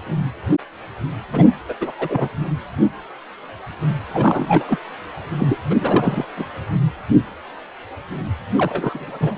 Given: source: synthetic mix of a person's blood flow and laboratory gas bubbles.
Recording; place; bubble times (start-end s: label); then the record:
Doppler ultrasound of blood flow; precordium
1.31-1.49 s: bubbles
1.69-1.74 s: bubbles
1.80-1.92 s: bubbles
1.99-2.29 s: bubbles
4.13-4.65 s: bubbles
4.68-4.78 s: bubbles
5.38-5.58 s: bubbles
5.70-5.75 s: bubbles
5.80-6.25 s: bubbles
6.36-6.46 s: bubbles
8.58-9.38 s: bubbles
From the record:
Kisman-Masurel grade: 332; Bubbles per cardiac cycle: rolling drumbeat, 9 or more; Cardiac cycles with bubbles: 50 to 99%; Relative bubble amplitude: moderate (0.250 to 0.450); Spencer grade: 3 (all of the cardiac periods contain showers or single bubble signals, but not dominating or overriding the cardiac motion signals); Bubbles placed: anywhere in the cardiac cycle